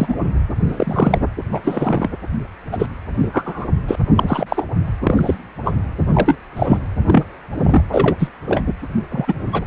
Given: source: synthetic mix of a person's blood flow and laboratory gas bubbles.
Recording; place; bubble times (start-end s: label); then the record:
Doppler ultrasound of blood flow; precordium
0.00-0.15 s: bubbles
0.68-1.19 s: bubbles
1.52-1.59 s: bubbles
1.64-2.08 s: bubbles
2.71-2.86 s: bubbles
3.19-3.66 s: bubbles
3.87-3.96 s: bubbles
4.15-4.66 s: bubbles
5.03-5.35 s: bubbles
5.64-5.74 s: bubbles
6.13-6.38 s: bubbles
6.56-6.77 s: bubbles
7.06-7.25 s: bubbles
7.58-7.83 s: bubbles
7.92-8.17 s: bubbles
8.19-8.29 s: bubbles
8.46-8.61 s: bubbles
9.11-9.35 s: bubbles
9.52-9.66 s: bubbles
From the record:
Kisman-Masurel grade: 243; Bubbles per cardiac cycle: several, 3 to 8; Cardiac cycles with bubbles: 100%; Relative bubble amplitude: loud (0.450 to 0.775); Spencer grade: 3 (all of the cardiac periods contain showers or single bubble signals, but not dominating or overriding the cardiac motion signals); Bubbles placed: anywhere in the cardiac cycle